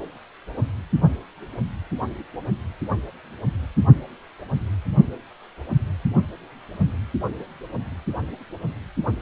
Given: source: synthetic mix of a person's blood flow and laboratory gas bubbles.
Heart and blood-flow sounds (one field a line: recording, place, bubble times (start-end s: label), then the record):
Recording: Doppler ultrasound of blood flow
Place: precordium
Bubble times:
no bubbles
From the record:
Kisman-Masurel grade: 000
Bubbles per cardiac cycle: 0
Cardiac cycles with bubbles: 0%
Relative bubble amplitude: no bubbles discernible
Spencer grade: 0 (complete lack of bubble signals)